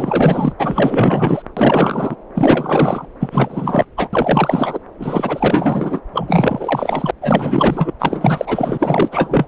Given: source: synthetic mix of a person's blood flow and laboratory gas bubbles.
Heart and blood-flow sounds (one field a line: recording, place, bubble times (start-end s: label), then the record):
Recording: Doppler ultrasound of blood flow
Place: subclavian vein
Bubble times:
0.00-0.53 s: bubbles
0.58-1.42 s: bubbles
1.57-2.15 s: bubbles
2.34-3.06 s: bubbles
3.20-3.85 s: bubbles
3.96-4.08 s: bubbles
4.12-4.79 s: bubbles
4.99-6.00 s: bubbles
6.12-7.11 s: bubbles
7.21-7.92 s: bubbles
7.99-9.09 s: bubbles
9.12-9.46 s: bubbles
From the record:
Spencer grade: 4 (maximum detectable bubble signal sounding continuously throughout systole and diastole of every cardiac period, and overriding the amplitude of the normal cardiac signals)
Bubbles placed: anywhere in the cardiac cycle